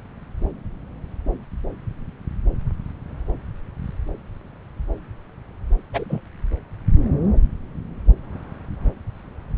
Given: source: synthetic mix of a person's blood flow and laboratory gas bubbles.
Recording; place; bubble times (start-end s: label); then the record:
Doppler ultrasound of blood flow; subclavian vein
5.92-6.21 s: bubbles
From the record:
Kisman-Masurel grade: 112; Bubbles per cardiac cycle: 1 to 2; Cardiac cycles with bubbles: 1 to 10%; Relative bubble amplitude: moderate (0.250 to 0.450); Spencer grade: 1 (occasional bubble signal discernible with the cardiac motion signal, with majority of cardiac periods free of bubbles); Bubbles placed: anywhere in the cardiac cycle